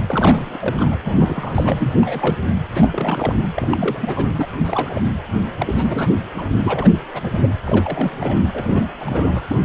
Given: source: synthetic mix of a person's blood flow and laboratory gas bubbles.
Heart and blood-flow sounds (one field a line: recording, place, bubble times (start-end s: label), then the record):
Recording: Doppler ultrasound of blood flow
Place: precordium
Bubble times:
0.07-0.58 s: bubbles
0.60-0.96 s: bubbles
1.04-1.95 s: bubbles
2.01-2.38 s: bubbles
2.75-2.88 s: bubbles
2.92-3.34 s: bubbles
3.56-4.26 s: bubbles
4.37-4.46 s: bubbles
4.58-5.01 s: bubbles
5.58-6.14 s: bubbles
6.36-6.49 s: bubbles
6.64-6.97 s: bubbles
7.14-7.21 s: bubbles
7.23-7.53 s: bubbles
7.64-8.40 s: bubbles
8.54-9.44 s: bubbles
9.49-9.58 s: bubbles
From the record:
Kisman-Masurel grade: 342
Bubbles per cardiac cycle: rolling drumbeat, 9 or more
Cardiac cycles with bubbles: 100%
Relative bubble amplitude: moderate (0.250 to 0.450)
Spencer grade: 3 (all of the cardiac periods contain showers or single bubble signals, but not dominating or overriding the cardiac motion signals)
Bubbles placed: anywhere in the cardiac cycle